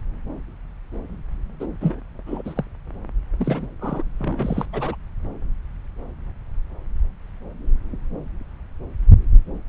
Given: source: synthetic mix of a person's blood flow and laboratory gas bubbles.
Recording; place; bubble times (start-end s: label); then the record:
Doppler ultrasound of blood flow; subclavian vein
1.60-1.66 s: bubbles
1.81-2.00 s: bubbles
2.27-2.42 s: bubbles
2.44-2.65 s: bubbles
3.39-3.67 s: bubbles
3.81-4.03 s: bubbles
4.20-4.66 s: bubbles
4.72-4.96 s: bubbles
From the record:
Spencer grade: 2 (many but less than half of the cardiac periods contain bubble signals, singularly or in groups); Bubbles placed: anywhere in the cardiac cycle